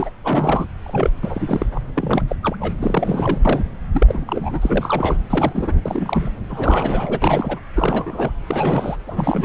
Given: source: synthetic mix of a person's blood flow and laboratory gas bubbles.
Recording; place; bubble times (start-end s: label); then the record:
Doppler ultrasound of blood flow; subclavian vein
0.00-0.09 s: bubbles
0.24-0.67 s: bubbles
0.86-1.10 s: bubbles
1.21-1.66 s: bubbles
1.74-1.79 s: bubbles
1.95-2.36 s: bubbles
2.42-2.56 s: bubbles
2.60-2.73 s: bubbles
2.80-3.38 s: bubbles
3.45-3.75 s: bubbles
3.92-5.18 s: bubbles
5.29-5.81 s: bubbles
5.86-6.31 s: bubbles
6.49-7.19 s: bubbles
7.21-7.60 s: bubbles
7.76-8.32 s: bubbles
8.50-8.96 s: bubbles
9.07-9.45 s: bubbles
From the record:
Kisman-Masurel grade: 342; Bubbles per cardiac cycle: rolling drumbeat, 9 or more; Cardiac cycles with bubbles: 100%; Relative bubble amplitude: moderate (0.250 to 0.450); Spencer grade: 3 (all of the cardiac periods contain showers or single bubble signals, but not dominating or overriding the cardiac motion signals); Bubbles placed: anywhere in the cardiac cycle